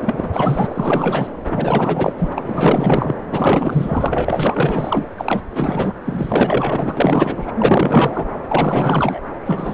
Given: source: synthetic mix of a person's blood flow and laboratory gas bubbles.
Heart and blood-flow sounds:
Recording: Doppler ultrasound of blood flow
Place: subclavian vein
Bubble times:
0.01-0.29 s: bubbles
0.33-1.27 s: bubbles
1.48-2.12 s: bubbles
2.18-2.29 s: bubbles
2.35-3.15 s: bubbles
3.31-5.05 s: bubbles
5.17-5.42 s: bubbles
5.50-5.93 s: bubbles
6.05-7.51 s: bubbles
7.57-8.26 s: bubbles
8.48-9.21 s: bubbles
9.45-9.74 s: bubbles
From the record:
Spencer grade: 4 (maximum detectable bubble signal sounding continuously throughout systole and diastole of every cardiac period, and overriding the amplitude of the normal cardiac signals)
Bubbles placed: anywhere in the cardiac cycle

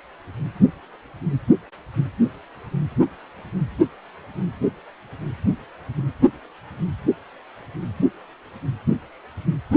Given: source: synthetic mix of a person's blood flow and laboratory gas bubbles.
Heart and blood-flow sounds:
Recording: Doppler ultrasound of blood flow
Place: precordium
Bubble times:
no bubbles
From the record:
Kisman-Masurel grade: 000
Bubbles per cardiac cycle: 0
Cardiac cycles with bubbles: 0%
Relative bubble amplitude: no bubbles discernible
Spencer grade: 0 (complete lack of bubble signals)

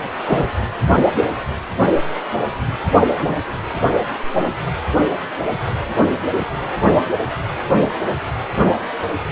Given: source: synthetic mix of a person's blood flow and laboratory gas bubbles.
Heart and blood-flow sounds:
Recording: Doppler ultrasound of blood flow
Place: precordium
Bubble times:
0.25-0.45 s: bubbles
3.14-3.40 s: bubbles
From the record:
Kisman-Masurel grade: 122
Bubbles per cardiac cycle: 1 to 2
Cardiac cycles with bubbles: 10 to 50%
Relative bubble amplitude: moderate (0.250 to 0.450)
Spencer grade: 2 (many but less than half of the cardiac periods contain bubble signals, singularly or in groups)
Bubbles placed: only in the low amplitude regions of the cardiac cycle

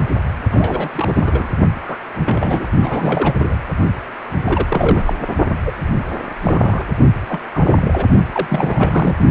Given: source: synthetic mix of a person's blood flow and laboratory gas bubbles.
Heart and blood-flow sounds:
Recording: Doppler ultrasound of blood flow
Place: precordium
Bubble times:
0.08-0.16 s: bubbles
0.51-0.89 s: bubbles
0.95-1.48 s: bubbles
1.81-1.98 s: bubbles
2.19-2.69 s: bubbles
2.80-3.33 s: bubbles
3.38-3.56 s: bubbles
4.44-5.13 s: bubbles
5.65-5.71 s: bubbles
6.41-6.86 s: bubbles
7.28-7.40 s: bubbles
7.53-8.06 s: bubbles
8.32-9.15 s: bubbles
From the record:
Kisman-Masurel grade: 242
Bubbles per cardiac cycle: several, 3 to 8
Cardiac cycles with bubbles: 100%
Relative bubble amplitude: moderate (0.250 to 0.450)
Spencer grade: 3 (all of the cardiac periods contain showers or single bubble signals, but not dominating or overriding the cardiac motion signals)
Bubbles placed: only in the low amplitude regions of the cardiac cycle

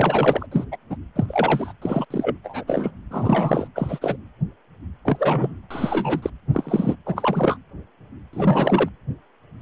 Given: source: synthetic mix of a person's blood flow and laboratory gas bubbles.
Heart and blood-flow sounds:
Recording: Doppler ultrasound of blood flow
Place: precordium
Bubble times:
0.00-0.46 s: bubbles
0.51-0.65 s: bubbles
0.71-0.77 s: bubbles
0.90-0.97 s: bubbles
1.16-1.73 s: bubbles
1.81-2.05 s: bubbles
2.10-2.37 s: bubbles
2.44-2.64 s: bubbles
2.67-2.91 s: bubbles
3.10-3.67 s: bubbles
3.75-4.17 s: bubbles
5.05-5.55 s: bubbles
5.70-6.30 s: bubbles
6.52-6.96 s: bubbles
7.06-7.57 s: bubbles
8.32-8.88 s: bubbles
From the record:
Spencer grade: 3 (all of the cardiac periods contain showers or single bubble signals, but not dominating or overriding the cardiac motion signals)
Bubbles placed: anywhere in the cardiac cycle

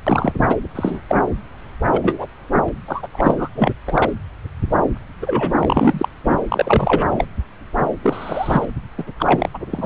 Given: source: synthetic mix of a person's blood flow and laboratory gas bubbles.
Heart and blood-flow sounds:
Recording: Doppler ultrasound of blood flow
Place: subclavian vein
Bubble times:
0.07-0.32 s: bubbles
0.38-0.56 s: bubbles
0.75-1.00 s: bubbles
1.08-1.20 s: bubbles
1.88-2.27 s: bubbles
2.67-2.69 s: bubbles
2.88-3.07 s: bubbles
3.12-3.49 s: bubbles
3.55-3.71 s: bubbles
3.85-4.12 s: bubbles
5.22-6.08 s: bubbles
6.24-6.42 s: bubbles
6.49-7.06 s: bubbles
7.11-7.27 s: bubbles
8.03-8.65 s: bubbles
8.97-9.04 s: bubbles
9.19-9.50 s: bubbles
9.54-9.58 s: bubbles
9.70-9.86 s: bubbles
From the record:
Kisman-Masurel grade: 233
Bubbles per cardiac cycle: several, 3 to 8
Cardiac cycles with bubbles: 50 to 99%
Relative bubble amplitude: loud (0.450 to 0.775)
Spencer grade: 3 (all of the cardiac periods contain showers or single bubble signals, but not dominating or overriding the cardiac motion signals)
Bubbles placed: anywhere in the cardiac cycle

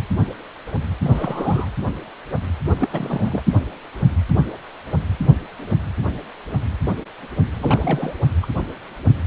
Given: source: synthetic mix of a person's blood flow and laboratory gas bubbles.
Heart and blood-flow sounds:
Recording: Doppler ultrasound of blood flow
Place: precordium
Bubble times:
1.01-1.69 s: bubbles
2.70-3.42 s: bubbles
7.59-8.16 s: bubbles
8.42-8.46 s: bubbles
From the record:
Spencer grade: 2 (many but less than half of the cardiac periods contain bubble signals, singularly or in groups)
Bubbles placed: anywhere in the cardiac cycle

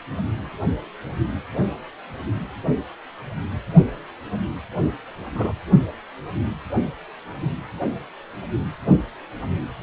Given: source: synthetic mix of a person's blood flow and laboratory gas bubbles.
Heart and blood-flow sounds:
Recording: Doppler ultrasound of blood flow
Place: precordium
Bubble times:
5.34-5.53 s: bubbles
From the record:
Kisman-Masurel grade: 112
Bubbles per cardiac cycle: 1 to 2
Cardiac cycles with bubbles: 1 to 10%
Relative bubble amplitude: moderate (0.250 to 0.450)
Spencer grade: 1 (occasional bubble signal discernible with the cardiac motion signal, with majority of cardiac periods free of bubbles)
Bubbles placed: anywhere in the cardiac cycle

